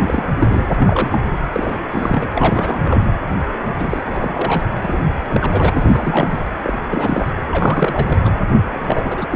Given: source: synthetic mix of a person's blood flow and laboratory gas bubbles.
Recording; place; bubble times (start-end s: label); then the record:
Doppler ultrasound of blood flow; precordium
0.00-0.23 s: bubbles
0.40-0.65 s: bubbles
0.79-1.20 s: bubbles
1.52-1.80 s: bubbles
1.90-2.29 s: bubbles
2.35-3.06 s: bubbles
3.79-4.66 s: bubbles
4.75-5.01 s: bubbles
5.29-5.70 s: bubbles
5.74-6.44 s: bubbles
6.62-6.77 s: bubbles
6.88-7.31 s: bubbles
7.51-8.31 s: bubbles
8.64-9.36 s: bubbles
From the record:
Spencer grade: 3 (all of the cardiac periods contain showers or single bubble signals, but not dominating or overriding the cardiac motion signals); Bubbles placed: anywhere in the cardiac cycle